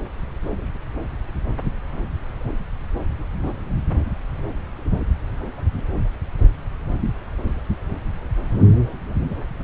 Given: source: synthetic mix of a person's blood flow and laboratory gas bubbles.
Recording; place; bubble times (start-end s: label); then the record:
Doppler ultrasound of blood flow; subclavian vein
no bubbles
From the record:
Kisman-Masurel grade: 000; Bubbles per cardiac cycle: 0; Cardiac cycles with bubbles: 0%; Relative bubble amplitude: no bubbles discernible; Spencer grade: 0 (complete lack of bubble signals)